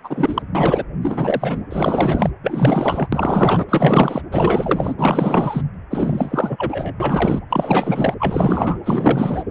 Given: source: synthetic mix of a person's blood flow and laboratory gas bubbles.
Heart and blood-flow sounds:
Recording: Doppler ultrasound of blood flow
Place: precordium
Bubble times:
0.04-0.42 s: bubbles
0.55-0.84 s: bubbles
1.02-1.63 s: bubbles
1.71-2.30 s: bubbles
2.42-3.08 s: bubbles
3.12-3.65 s: bubbles
3.68-4.21 s: bubbles
4.32-4.94 s: bubbles
4.97-5.62 s: bubbles
5.91-6.95 s: bubbles
7.00-7.40 s: bubbles
7.50-8.14 s: bubbles
8.19-8.79 s: bubbles
8.84-9.43 s: bubbles
From the record:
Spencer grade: 4 (maximum detectable bubble signal sounding continuously throughout systole and diastole of every cardiac period, and overriding the amplitude of the normal cardiac signals)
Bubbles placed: anywhere in the cardiac cycle

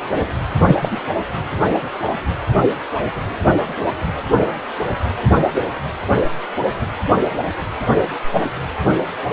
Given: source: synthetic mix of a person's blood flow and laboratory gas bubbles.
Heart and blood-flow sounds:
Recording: Doppler ultrasound of blood flow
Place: precordium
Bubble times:
0.67-0.76 s: bubbles
0.80-0.99 s: bubbles
From the record:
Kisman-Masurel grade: 213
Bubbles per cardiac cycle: several, 3 to 8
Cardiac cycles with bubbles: 1 to 10%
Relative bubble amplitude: loud (0.450 to 0.775)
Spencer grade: 1 (occasional bubble signal discernible with the cardiac motion signal, with majority of cardiac periods free of bubbles)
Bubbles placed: anywhere in the cardiac cycle

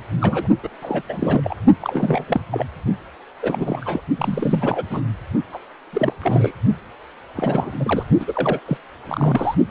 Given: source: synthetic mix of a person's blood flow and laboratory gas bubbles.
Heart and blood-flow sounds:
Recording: Doppler ultrasound of blood flow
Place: precordium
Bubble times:
0.21-0.47 s: bubbles
0.63-0.68 s: bubbles
0.82-1.01 s: bubbles
1.08-1.56 s: bubbles
1.81-2.24 s: bubbles
2.27-2.41 s: bubbles
2.52-2.66 s: bubbles
3.42-4.01 s: bubbles
4.17-4.83 s: bubbles
4.90-5.01 s: bubbles
5.52-5.58 s: bubbles
5.93-6.13 s: bubbles
6.21-6.52 s: bubbles
7.35-7.71 s: bubbles
7.79-8.05 s: bubbles
8.19-8.60 s: bubbles
8.65-8.78 s: bubbles
9.07-9.55 s: bubbles
From the record:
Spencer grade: 3 (all of the cardiac periods contain showers or single bubble signals, but not dominating or overriding the cardiac motion signals)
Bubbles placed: only in the low amplitude regions of the cardiac cycle

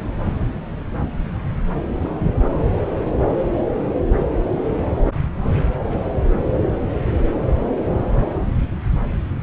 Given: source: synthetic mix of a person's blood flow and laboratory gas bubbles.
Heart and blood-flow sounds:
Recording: Doppler ultrasound of blood flow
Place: subclavian vein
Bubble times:
no bubbles
From the record:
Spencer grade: 0 (complete lack of bubble signals)

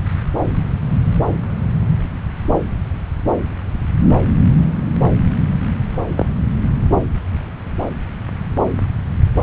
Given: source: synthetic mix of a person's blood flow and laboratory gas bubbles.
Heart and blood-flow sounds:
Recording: Doppler ultrasound of blood flow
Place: subclavian vein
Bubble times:
6.15-6.26 s: bubbles
From the record:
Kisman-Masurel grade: 113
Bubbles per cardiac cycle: 1 to 2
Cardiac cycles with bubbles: 1 to 10%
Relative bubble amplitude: loud (0.450 to 0.775)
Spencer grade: 1 (occasional bubble signal discernible with the cardiac motion signal, with majority of cardiac periods free of bubbles)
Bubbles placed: anywhere in the cardiac cycle

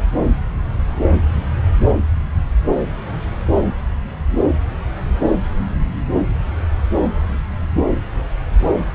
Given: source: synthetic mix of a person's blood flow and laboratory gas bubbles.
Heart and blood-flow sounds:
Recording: Doppler ultrasound of blood flow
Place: subclavian vein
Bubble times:
no bubbles
From the record:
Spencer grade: 0 (complete lack of bubble signals)

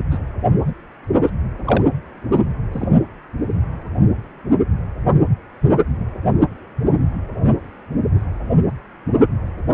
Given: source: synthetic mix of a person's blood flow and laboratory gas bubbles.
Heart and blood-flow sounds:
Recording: Doppler ultrasound of blood flow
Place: precordium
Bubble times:
0.11-0.19 s: bubbles
0.66-0.73 s: bubbles
1.22-1.30 s: bubbles
1.65-1.84 s: bubbles
2.31-2.40 s: bubbles
2.71-2.88 s: bubbles
From the record:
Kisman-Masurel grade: 222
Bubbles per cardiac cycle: several, 3 to 8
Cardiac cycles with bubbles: 10 to 50%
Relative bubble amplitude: moderate (0.250 to 0.450)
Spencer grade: 2 (many but less than half of the cardiac periods contain bubble signals, singularly or in groups)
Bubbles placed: only in the low amplitude regions of the cardiac cycle

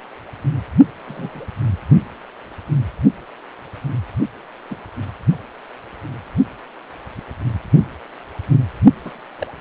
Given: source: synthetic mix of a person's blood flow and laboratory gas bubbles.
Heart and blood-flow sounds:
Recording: Doppler ultrasound of blood flow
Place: precordium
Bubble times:
1.05-1.47 s: bubbles
4.70-4.75 s: bubbles
9.04-9.12 s: bubbles
9.38-9.47 s: bubbles
From the record:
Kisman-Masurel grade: 121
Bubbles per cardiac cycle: 1 to 2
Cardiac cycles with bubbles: 10 to 50%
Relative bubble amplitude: barely perceptible (0.100 to 0.250)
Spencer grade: 2 (many but less than half of the cardiac periods contain bubble signals, singularly or in groups)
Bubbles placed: only in the low amplitude regions of the cardiac cycle

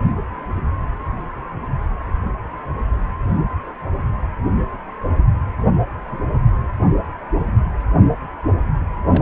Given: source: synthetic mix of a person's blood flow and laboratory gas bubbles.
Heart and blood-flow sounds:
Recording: Doppler ultrasound of blood flow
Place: precordium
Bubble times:
9.05-9.22 s: bubbles
From the record:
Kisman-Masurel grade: 211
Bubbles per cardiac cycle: several, 3 to 8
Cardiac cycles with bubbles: 1 to 10%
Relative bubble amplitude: barely perceptible (0.100 to 0.250)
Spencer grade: 1 (occasional bubble signal discernible with the cardiac motion signal, with majority of cardiac periods free of bubbles)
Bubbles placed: anywhere in the cardiac cycle

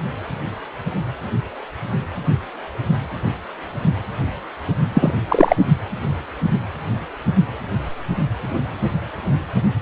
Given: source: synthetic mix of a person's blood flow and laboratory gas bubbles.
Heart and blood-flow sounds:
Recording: Doppler ultrasound of blood flow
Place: precordium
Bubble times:
4.94-5.12 s: bubbles
5.29-5.55 s: bubbles
From the record:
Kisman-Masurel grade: 113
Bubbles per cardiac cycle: 1 to 2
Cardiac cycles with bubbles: 1 to 10%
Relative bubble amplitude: loud (0.450 to 0.775)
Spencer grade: 1 (occasional bubble signal discernible with the cardiac motion signal, with majority of cardiac periods free of bubbles)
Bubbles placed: anywhere in the cardiac cycle

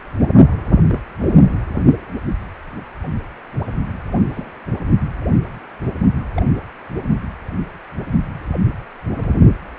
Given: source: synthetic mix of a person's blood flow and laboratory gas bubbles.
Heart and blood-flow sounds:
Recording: Doppler ultrasound of blood flow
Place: precordium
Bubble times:
0.80-1.00 s: bubbles
4.14-4.51 s: bubbles
6.37-6.43 s: bubbles
From the record:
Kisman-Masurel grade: 121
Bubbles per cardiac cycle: 1 to 2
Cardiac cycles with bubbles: 10 to 50%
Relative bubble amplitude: barely perceptible (0.100 to 0.250)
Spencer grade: 2 (many but less than half of the cardiac periods contain bubble signals, singularly or in groups)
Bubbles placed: anywhere in the cardiac cycle

